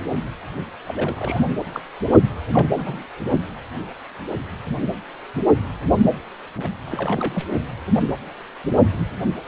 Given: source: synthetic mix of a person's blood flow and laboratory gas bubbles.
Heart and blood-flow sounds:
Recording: Doppler ultrasound of blood flow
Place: precordium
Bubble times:
0.84-1.43 s: bubbles
1.73-1.80 s: bubbles
2.53-2.73 s: bubbles
2.75-3.06 s: bubbles
6.58-6.68 s: bubbles
6.86-7.45 s: bubbles
From the record:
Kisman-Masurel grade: 222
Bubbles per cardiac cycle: several, 3 to 8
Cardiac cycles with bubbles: 10 to 50%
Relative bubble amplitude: moderate (0.250 to 0.450)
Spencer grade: 2 (many but less than half of the cardiac periods contain bubble signals, singularly or in groups)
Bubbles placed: only in the low amplitude regions of the cardiac cycle

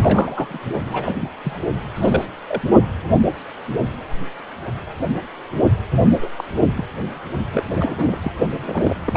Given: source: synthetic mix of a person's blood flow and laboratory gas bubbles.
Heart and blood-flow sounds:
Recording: Doppler ultrasound of blood flow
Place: precordium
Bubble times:
0.00-0.60 s: bubbles
0.86-1.17 s: bubbles
1.20-1.29 s: bubbles
1.44-1.61 s: bubbles
1.96-2.26 s: bubbles
2.47-2.61 s: bubbles
6.21-6.31 s: bubbles
6.38-6.44 s: bubbles
6.77-6.85 s: bubbles
7.52-8.32 s: bubbles
8.62-8.96 s: bubbles
9.06-9.17 s: bubbles
From the record:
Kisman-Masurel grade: 232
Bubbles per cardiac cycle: several, 3 to 8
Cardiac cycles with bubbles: 50 to 99%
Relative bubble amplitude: moderate (0.250 to 0.450)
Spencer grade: 3 (all of the cardiac periods contain showers or single bubble signals, but not dominating or overriding the cardiac motion signals)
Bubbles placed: only in the low amplitude regions of the cardiac cycle

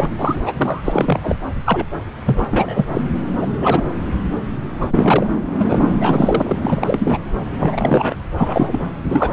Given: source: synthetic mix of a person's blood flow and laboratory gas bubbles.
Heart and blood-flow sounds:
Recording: Doppler ultrasound of blood flow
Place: subclavian vein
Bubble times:
0.00-0.10 s: bubbles
0.19-0.36 s: bubbles
0.45-0.53 s: bubbles
0.56-0.81 s: bubbles
0.84-1.20 s: bubbles
1.23-1.37 s: bubbles
1.66-1.87 s: bubbles
2.25-2.45 s: bubbles
2.51-2.84 s: bubbles
2.88-3.01 s: bubbles
3.42-3.47 s: bubbles
3.60-3.84 s: bubbles
4.81-4.88 s: bubbles
4.90-5.27 s: bubbles
5.58-5.79 s: bubbles
5.99-6.57 s: bubbles
6.62-7.19 s: bubbles
7.60-8.15 s: bubbles
8.37-8.86 s: bubbles
9.11-9.33 s: bubbles
From the record:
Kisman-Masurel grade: 243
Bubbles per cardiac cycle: several, 3 to 8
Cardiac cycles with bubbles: 100%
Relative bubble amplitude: loud (0.450 to 0.775)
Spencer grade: 3 (all of the cardiac periods contain showers or single bubble signals, but not dominating or overriding the cardiac motion signals)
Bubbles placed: anywhere in the cardiac cycle

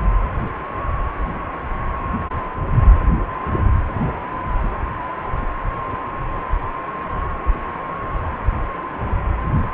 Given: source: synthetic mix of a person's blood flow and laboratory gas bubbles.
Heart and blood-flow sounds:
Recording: Doppler ultrasound of blood flow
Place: precordium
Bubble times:
no bubbles
From the record:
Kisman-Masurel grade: 000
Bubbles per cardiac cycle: 0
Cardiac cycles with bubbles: 0%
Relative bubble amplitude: no bubbles discernible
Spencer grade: 0 (complete lack of bubble signals)

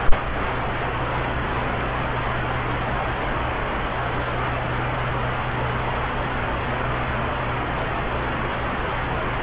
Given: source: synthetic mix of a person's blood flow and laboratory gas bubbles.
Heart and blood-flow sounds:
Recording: Doppler ultrasound of blood flow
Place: subclavian vein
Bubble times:
no bubbles
From the record:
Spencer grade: 0 (complete lack of bubble signals)

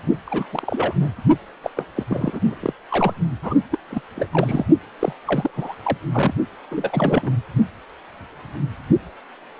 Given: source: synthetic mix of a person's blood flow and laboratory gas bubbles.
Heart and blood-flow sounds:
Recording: Doppler ultrasound of blood flow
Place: precordium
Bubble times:
0.26-0.46 s: bubbles
0.50-0.93 s: bubbles
1.00-1.09 s: bubbles
1.62-1.70 s: bubbles
1.77-1.85 s: bubbles
1.96-2.03 s: bubbles
2.08-2.56 s: bubbles
2.60-2.73 s: bubbles
2.89-3.13 s: bubbles
3.43-3.55 s: bubbles
3.71-3.78 s: bubbles
3.90-4.01 s: bubbles
4.15-4.26 s: bubbles
4.31-4.66 s: bubbles
4.99-5.13 s: bubbles
5.24-5.50 s: bubbles
5.53-5.74 s: bubbles
5.82-5.97 s: bubbles
6.13-6.34 s: bubbles
6.71-7.36 s: bubbles
From the record:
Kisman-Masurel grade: 332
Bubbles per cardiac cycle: rolling drumbeat, 9 or more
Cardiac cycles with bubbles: 50 to 99%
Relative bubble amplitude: moderate (0.250 to 0.450)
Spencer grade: 3 (all of the cardiac periods contain showers or single bubble signals, but not dominating or overriding the cardiac motion signals)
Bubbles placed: only in the low amplitude regions of the cardiac cycle

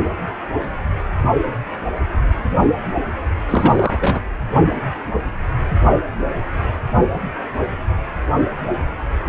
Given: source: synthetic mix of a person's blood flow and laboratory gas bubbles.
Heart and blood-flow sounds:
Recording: Doppler ultrasound of blood flow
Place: precordium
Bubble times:
3.49-3.96 s: bubbles
4.01-4.21 s: bubbles
From the record:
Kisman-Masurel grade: 212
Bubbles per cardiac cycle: several, 3 to 8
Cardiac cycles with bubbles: 1 to 10%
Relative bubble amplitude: moderate (0.250 to 0.450)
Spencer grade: 1 (occasional bubble signal discernible with the cardiac motion signal, with majority of cardiac periods free of bubbles)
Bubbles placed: anywhere in the cardiac cycle

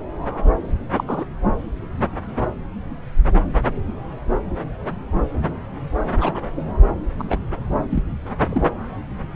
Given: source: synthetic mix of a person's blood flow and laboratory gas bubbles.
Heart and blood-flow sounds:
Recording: Doppler ultrasound of blood flow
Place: subclavian vein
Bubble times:
0.97-1.04 s: bubbles
1.07-1.25 s: bubbles
6.17-6.43 s: bubbles
7.18-7.39 s: bubbles
7.89-8.02 s: bubbles
8.49-8.66 s: bubbles
From the record:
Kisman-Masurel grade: 122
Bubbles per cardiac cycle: 1 to 2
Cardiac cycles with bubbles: 10 to 50%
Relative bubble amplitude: moderate (0.250 to 0.450)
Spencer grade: 2 (many but less than half of the cardiac periods contain bubble signals, singularly or in groups)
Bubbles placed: anywhere in the cardiac cycle

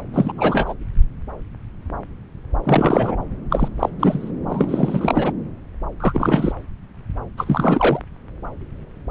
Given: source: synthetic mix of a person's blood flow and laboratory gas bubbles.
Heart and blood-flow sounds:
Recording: Doppler ultrasound of blood flow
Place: subclavian vein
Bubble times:
0.14-0.32 s: bubbles
0.37-0.74 s: bubbles
2.64-3.16 s: bubbles
3.50-3.68 s: bubbles
3.79-3.90 s: bubbles
4.00-4.32 s: bubbles
4.49-5.33 s: bubbles
6.00-6.53 s: bubbles
7.37-8.00 s: bubbles
From the record:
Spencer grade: 3 (all of the cardiac periods contain showers or single bubble signals, but not dominating or overriding the cardiac motion signals)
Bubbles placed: anywhere in the cardiac cycle

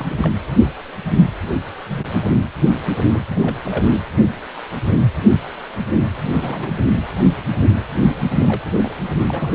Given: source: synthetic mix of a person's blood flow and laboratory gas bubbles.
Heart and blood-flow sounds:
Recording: Doppler ultrasound of blood flow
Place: precordium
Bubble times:
0.00-0.30 s: bubbles
3.10-3.22 s: bubbles
3.29-3.56 s: bubbles
3.63-3.97 s: bubbles
6.34-6.75 s: bubbles
8.30-8.92 s: bubbles
9.26-9.54 s: bubbles
From the record:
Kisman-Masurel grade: 221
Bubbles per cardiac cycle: several, 3 to 8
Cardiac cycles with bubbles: 10 to 50%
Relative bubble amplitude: barely perceptible (0.100 to 0.250)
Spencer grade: 2 (many but less than half of the cardiac periods contain bubble signals, singularly or in groups)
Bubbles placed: anywhere in the cardiac cycle

